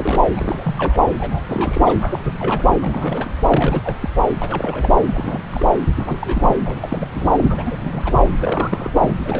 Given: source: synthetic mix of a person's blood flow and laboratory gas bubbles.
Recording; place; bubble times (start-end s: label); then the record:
Doppler ultrasound of blood flow; subclavian vein
0.00-0.21 s: bubbles
0.36-1.01 s: bubbles
1.18-1.42 s: bubbles
1.48-1.97 s: bubbles
1.99-2.19 s: bubbles
2.24-2.35 s: bubbles
2.39-2.76 s: bubbles
2.81-3.31 s: bubbles
3.48-3.97 s: bubbles
4.01-4.09 s: bubbles
4.38-4.96 s: bubbles
5.09-5.42 s: bubbles
5.50-5.65 s: bubbles
5.96-6.56 s: bubbles
6.64-7.07 s: bubbles
7.14-7.26 s: bubbles
7.36-7.75 s: bubbles
7.83-8.16 s: bubbles
8.24-8.29 s: bubbles
8.40-8.89 s: bubbles
8.98-9.16 s: bubbles
9.19-9.40 s: bubbles
From the record:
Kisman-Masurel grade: 342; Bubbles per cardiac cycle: rolling drumbeat, 9 or more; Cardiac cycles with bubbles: 100%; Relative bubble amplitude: moderate (0.250 to 0.450); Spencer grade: 3 (all of the cardiac periods contain showers or single bubble signals, but not dominating or overriding the cardiac motion signals); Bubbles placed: anywhere in the cardiac cycle